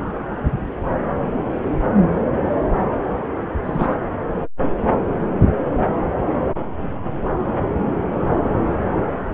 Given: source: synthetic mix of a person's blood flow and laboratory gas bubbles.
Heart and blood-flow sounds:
Doppler ultrasound of blood flow; subclavian vein
3.65-3.97 s: bubbles
From the record:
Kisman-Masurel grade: 112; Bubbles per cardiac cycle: 1 to 2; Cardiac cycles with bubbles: 1 to 10%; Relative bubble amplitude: moderate (0.250 to 0.450); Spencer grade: 1 (occasional bubble signal discernible with the cardiac motion signal, with majority of cardiac periods free of bubbles); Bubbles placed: anywhere in the cardiac cycle

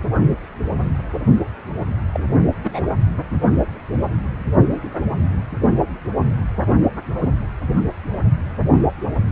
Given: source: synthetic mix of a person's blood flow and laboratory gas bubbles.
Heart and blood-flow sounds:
Doppler ultrasound of blood flow; precordium
2.12-2.25 s: bubbles
2.63-2.86 s: bubbles
From the record:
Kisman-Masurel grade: 112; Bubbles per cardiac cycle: 1 to 2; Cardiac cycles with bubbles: 1 to 10%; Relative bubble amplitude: moderate (0.250 to 0.450); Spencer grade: 1 (occasional bubble signal discernible with the cardiac motion signal, with majority of cardiac periods free of bubbles); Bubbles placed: only in the low amplitude regions of the cardiac cycle

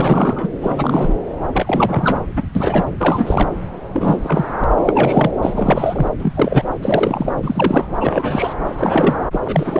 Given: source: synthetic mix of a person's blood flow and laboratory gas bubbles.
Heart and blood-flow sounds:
Doppler ultrasound of blood flow; subclavian vein
0.00-0.49 s: bubbles
0.61-1.14 s: bubbles
1.53-2.25 s: bubbles
2.36-2.43 s: bubbles
2.55-2.85 s: bubbles
2.98-3.51 s: bubbles
3.93-4.45 s: bubbles
4.53-4.64 s: bubbles
4.85-5.31 s: bubbles
5.42-6.06 s: bubbles
6.20-6.33 s: bubbles
6.35-6.64 s: bubbles
6.82-7.33 s: bubbles
7.43-7.88 s: bubbles
8.00-8.55 s: bubbles
8.77-9.17 s: bubbles
9.31-9.39 s: bubbles
9.44-9.80 s: bubbles
From the record:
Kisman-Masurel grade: 333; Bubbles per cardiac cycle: rolling drumbeat, 9 or more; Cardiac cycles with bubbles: 50 to 99%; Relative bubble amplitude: loud (0.450 to 0.775); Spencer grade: 3 (all of the cardiac periods contain showers or single bubble signals, but not dominating or overriding the cardiac motion signals); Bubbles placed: anywhere in the cardiac cycle

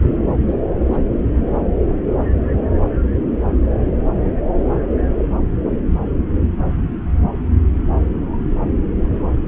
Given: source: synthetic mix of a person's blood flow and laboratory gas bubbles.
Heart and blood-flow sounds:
Doppler ultrasound of blood flow; subclavian vein
0.48-0.55 s: bubbles
0.86-1.10 s: bubbles
From the record:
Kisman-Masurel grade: 111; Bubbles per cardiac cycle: 1 to 2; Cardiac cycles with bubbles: 1 to 10%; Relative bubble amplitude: barely perceptible (0.100 to 0.250); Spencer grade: 1 (occasional bubble signal discernible with the cardiac motion signal, with majority of cardiac periods free of bubbles); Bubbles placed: anywhere in the cardiac cycle

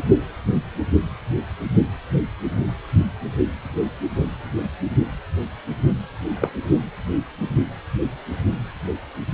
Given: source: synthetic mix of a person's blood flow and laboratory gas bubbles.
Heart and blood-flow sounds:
Doppler ultrasound of blood flow; precordium
6.40-6.50 s: bubbles
From the record:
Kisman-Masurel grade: 112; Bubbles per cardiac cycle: 1 to 2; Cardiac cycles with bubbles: 1 to 10%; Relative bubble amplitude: moderate (0.250 to 0.450); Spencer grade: 1 (occasional bubble signal discernible with the cardiac motion signal, with majority of cardiac periods free of bubbles); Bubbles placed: only in the low amplitude regions of the cardiac cycle

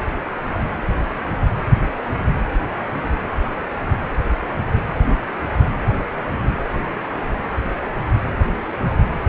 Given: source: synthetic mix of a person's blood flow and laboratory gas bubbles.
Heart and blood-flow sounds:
Doppler ultrasound of blood flow; precordium
no bubbles
From the record:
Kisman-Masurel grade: 000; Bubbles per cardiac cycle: 0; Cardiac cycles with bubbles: 0%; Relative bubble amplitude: no bubbles discernible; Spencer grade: 0 (complete lack of bubble signals)

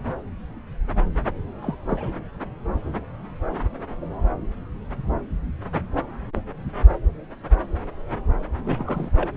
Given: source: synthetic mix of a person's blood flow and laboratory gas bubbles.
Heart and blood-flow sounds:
Doppler ultrasound of blood flow; subclavian vein
1.62-1.75 s: bubbles
1.88-2.13 s: bubbles
8.66-9.10 s: bubbles
9.18-9.29 s: bubbles
From the record:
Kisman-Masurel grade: 211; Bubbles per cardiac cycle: several, 3 to 8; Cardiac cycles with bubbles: 1 to 10%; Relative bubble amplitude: barely perceptible (0.100 to 0.250); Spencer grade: 1 (occasional bubble signal discernible with the cardiac motion signal, with majority of cardiac periods free of bubbles); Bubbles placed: anywhere in the cardiac cycle

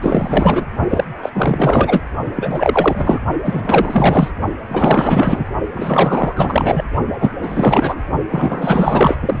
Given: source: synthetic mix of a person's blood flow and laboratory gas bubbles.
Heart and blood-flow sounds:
Doppler ultrasound of blood flow; precordium
0.01-0.66 s: bubbles
0.90-1.04 s: bubbles
1.22-1.30 s: bubbles
1.32-2.00 s: bubbles
2.35-3.20 s: bubbles
3.42-4.31 s: bubbles
4.68-5.46 s: bubbles
5.73-6.33 s: bubbles
6.36-6.83 s: bubbles
7.20-7.32 s: bubbles
7.42-8.01 s: bubbles
8.30-9.15 s: bubbles
9.21-9.40 s: bubbles
From the record:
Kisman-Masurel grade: 444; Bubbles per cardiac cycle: continuous sound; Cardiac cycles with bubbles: 100%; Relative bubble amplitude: maximal (0.775 to 0.999); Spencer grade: 4 (maximum detectable bubble signal sounding continuously throughout systole and diastole of every cardiac period, and overriding the amplitude of the normal cardiac signals); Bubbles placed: only in the low amplitude regions of the cardiac cycle

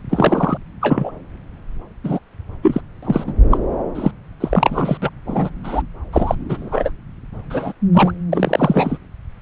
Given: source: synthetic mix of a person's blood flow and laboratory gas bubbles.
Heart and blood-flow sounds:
Doppler ultrasound of blood flow; subclavian vein
0.10-0.57 s: bubbles
0.81-1.11 s: bubbles
2.04-2.19 s: bubbles
2.62-2.81 s: bubbles
3.03-3.24 s: bubbles
3.26-3.33 s: bubbles
3.50-3.58 s: bubbles
3.95-4.11 s: bubbles
4.40-4.97 s: bubbles
5.02-5.09 s: bubbles
5.26-5.50 s: bubbles
5.63-5.82 s: bubbles
6.12-6.35 s: bubbles
6.49-6.92 s: bubbles
7.50-7.72 s: bubbles
7.92-8.12 s: bubbles
8.32-8.98 s: bubbles
From the record:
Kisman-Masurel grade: 233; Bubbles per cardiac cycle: several, 3 to 8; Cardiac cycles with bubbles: 50 to 99%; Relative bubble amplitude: loud (0.450 to 0.775); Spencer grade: 3 (all of the cardiac periods contain showers or single bubble signals, but not dominating or overriding the cardiac motion signals); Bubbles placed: anywhere in the cardiac cycle

